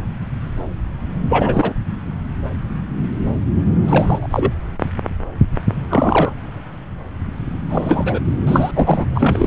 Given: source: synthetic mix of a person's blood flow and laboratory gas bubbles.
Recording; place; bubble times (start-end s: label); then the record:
Doppler ultrasound of blood flow; subclavian vein
1.29-1.74 s: bubbles
3.87-4.27 s: bubbles
4.30-4.53 s: bubbles
5.90-6.34 s: bubbles
7.69-8.19 s: bubbles
8.46-8.71 s: bubbles
8.74-9.05 s: bubbles
9.14-9.47 s: bubbles
From the record:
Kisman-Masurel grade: 223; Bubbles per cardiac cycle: several, 3 to 8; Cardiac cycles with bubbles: 10 to 50%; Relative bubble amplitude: loud (0.450 to 0.775); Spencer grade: 2 (many but less than half of the cardiac periods contain bubble signals, singularly or in groups); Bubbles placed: anywhere in the cardiac cycle